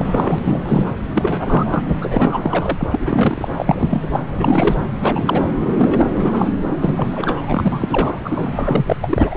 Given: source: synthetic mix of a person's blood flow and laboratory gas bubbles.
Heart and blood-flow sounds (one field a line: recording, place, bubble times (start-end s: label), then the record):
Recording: Doppler ultrasound of blood flow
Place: subclavian vein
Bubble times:
0.00-0.39 s: bubbles
0.42-0.94 s: bubbles
1.14-1.83 s: bubbles
2.02-3.48 s: bubbles
3.58-3.88 s: bubbles
3.90-4.20 s: bubbles
4.39-4.76 s: bubbles
5.00-5.47 s: bubbles
5.75-6.52 s: bubbles
6.82-8.20 s: bubbles
8.24-8.97 s: bubbles
9.02-9.35 s: bubbles
From the record:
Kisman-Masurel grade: 343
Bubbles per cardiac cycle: rolling drumbeat, 9 or more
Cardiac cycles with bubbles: 100%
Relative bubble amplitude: loud (0.450 to 0.775)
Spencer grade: 3 (all of the cardiac periods contain showers or single bubble signals, but not dominating or overriding the cardiac motion signals)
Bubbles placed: anywhere in the cardiac cycle